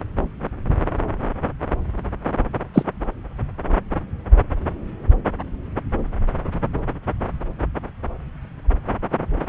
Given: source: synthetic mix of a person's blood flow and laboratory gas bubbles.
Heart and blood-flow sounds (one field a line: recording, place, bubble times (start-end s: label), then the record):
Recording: Doppler ultrasound of blood flow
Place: subclavian vein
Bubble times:
2.73-2.83 s: bubbles
From the record:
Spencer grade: 1 (occasional bubble signal discernible with the cardiac motion signal, with majority of cardiac periods free of bubbles)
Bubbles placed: anywhere in the cardiac cycle